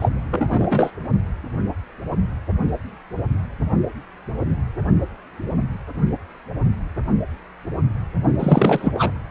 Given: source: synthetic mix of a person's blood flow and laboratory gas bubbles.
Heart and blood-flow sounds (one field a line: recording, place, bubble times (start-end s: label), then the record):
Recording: Doppler ultrasound of blood flow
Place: precordium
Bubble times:
0.00-0.10 s: bubbles
0.31-0.91 s: bubbles
8.39-9.11 s: bubbles
From the record:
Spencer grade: 2 (many but less than half of the cardiac periods contain bubble signals, singularly or in groups)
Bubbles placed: only in the low amplitude regions of the cardiac cycle